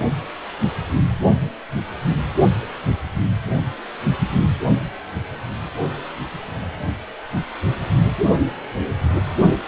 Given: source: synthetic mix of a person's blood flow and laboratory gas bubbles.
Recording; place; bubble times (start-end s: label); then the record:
Doppler ultrasound of blood flow; precordium
no bubbles
From the record:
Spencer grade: 0 (complete lack of bubble signals)